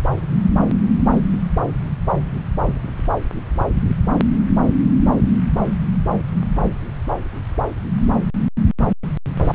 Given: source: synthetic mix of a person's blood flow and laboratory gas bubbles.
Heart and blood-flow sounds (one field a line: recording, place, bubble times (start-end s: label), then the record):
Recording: Doppler ultrasound of blood flow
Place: subclavian vein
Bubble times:
no bubbles
From the record:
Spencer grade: 0 (complete lack of bubble signals)